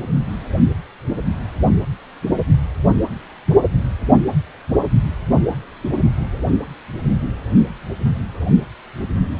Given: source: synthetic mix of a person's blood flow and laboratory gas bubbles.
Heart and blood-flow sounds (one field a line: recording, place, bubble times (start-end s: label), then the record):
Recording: Doppler ultrasound of blood flow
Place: precordium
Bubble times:
no bubbles
From the record:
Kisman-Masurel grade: 000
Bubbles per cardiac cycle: 0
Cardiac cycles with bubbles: 0%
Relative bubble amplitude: no bubbles discernible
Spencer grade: 0 (complete lack of bubble signals)